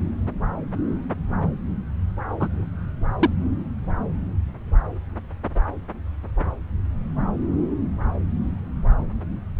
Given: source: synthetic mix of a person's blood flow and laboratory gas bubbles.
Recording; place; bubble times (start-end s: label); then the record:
Doppler ultrasound of blood flow; subclavian vein
2.40-2.48 s: bubbles
3.19-3.30 s: bubbles
From the record:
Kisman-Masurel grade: 112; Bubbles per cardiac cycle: 1 to 2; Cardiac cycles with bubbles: 1 to 10%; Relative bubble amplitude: moderate (0.250 to 0.450); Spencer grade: 1 (occasional bubble signal discernible with the cardiac motion signal, with majority of cardiac periods free of bubbles); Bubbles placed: anywhere in the cardiac cycle